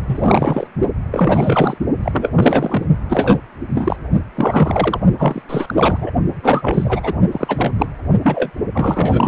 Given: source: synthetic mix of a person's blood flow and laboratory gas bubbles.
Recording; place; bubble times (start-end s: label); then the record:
Doppler ultrasound of blood flow; precordium
0.05-0.67 s: bubbles
1.11-1.77 s: bubbles
2.02-2.31 s: bubbles
2.34-2.86 s: bubbles
3.09-3.39 s: bubbles
3.74-3.96 s: bubbles
4.35-5.00 s: bubbles
5.19-5.42 s: bubbles
5.49-6.11 s: bubbles
6.43-7.01 s: bubbles
7.03-7.18 s: bubbles
7.32-7.73 s: bubbles
7.79-7.88 s: bubbles
8.23-8.50 s: bubbles
8.72-9.28 s: bubbles
From the record:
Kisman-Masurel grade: 343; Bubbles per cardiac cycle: rolling drumbeat, 9 or more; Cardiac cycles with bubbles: 100%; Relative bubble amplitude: loud (0.450 to 0.775); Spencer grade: 3 (all of the cardiac periods contain showers or single bubble signals, but not dominating or overriding the cardiac motion signals); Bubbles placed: only in the low amplitude regions of the cardiac cycle